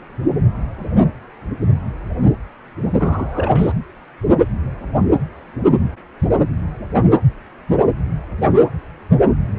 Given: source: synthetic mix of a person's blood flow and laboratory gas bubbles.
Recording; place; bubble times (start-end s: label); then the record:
Doppler ultrasound of blood flow; precordium
2.98-3.72 s: bubbles
From the record:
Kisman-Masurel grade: 212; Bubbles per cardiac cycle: several, 3 to 8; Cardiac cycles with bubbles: 1 to 10%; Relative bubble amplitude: moderate (0.250 to 0.450); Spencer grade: 1 (occasional bubble signal discernible with the cardiac motion signal, with majority of cardiac periods free of bubbles); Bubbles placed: anywhere in the cardiac cycle